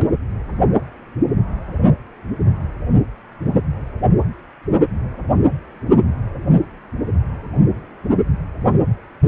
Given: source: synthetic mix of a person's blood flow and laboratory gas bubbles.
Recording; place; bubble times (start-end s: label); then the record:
Doppler ultrasound of blood flow; precordium
0.00-0.14 s: bubbles
From the record:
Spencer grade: 1 (occasional bubble signal discernible with the cardiac motion signal, with majority of cardiac periods free of bubbles); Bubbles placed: only in the low amplitude regions of the cardiac cycle